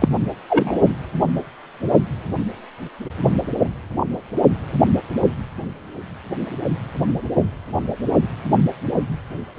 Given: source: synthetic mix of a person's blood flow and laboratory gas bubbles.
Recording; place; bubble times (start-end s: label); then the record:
Doppler ultrasound of blood flow; precordium
0.01-0.08 s: bubbles
0.49-0.78 s: bubbles
From the record:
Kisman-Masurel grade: 113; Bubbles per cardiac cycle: 1 to 2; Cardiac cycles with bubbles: 1 to 10%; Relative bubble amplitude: loud (0.450 to 0.775); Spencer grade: 1 (occasional bubble signal discernible with the cardiac motion signal, with majority of cardiac periods free of bubbles); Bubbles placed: only in the low amplitude regions of the cardiac cycle